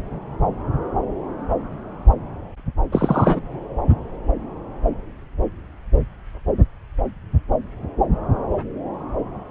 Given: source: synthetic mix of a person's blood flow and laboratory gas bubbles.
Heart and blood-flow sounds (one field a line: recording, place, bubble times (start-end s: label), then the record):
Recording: Doppler ultrasound of blood flow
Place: subclavian vein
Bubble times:
2.92-3.40 s: bubbles
From the record:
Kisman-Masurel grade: 213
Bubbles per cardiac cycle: several, 3 to 8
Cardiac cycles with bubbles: 1 to 10%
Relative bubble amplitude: loud (0.450 to 0.775)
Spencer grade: 1 (occasional bubble signal discernible with the cardiac motion signal, with majority of cardiac periods free of bubbles)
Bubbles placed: anywhere in the cardiac cycle